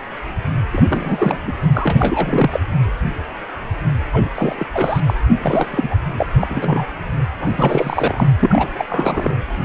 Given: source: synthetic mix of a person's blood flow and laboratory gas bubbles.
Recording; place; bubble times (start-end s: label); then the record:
Doppler ultrasound of blood flow; precordium
0.70-1.40 s: bubbles
1.47-1.53 s: bubbles
1.74-2.61 s: bubbles
4.12-4.29 s: bubbles
4.34-4.67 s: bubbles
4.74-5.00 s: bubbles
5.07-5.14 s: bubbles
5.43-5.96 s: bubbles
6.17-6.27 s: bubbles
6.40-6.86 s: bubbles
7.40-8.28 s: bubbles
8.40-8.68 s: bubbles
8.78-8.85 s: bubbles
8.89-9.35 s: bubbles
From the record:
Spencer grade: 3 (all of the cardiac periods contain showers or single bubble signals, but not dominating or overriding the cardiac motion signals); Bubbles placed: anywhere in the cardiac cycle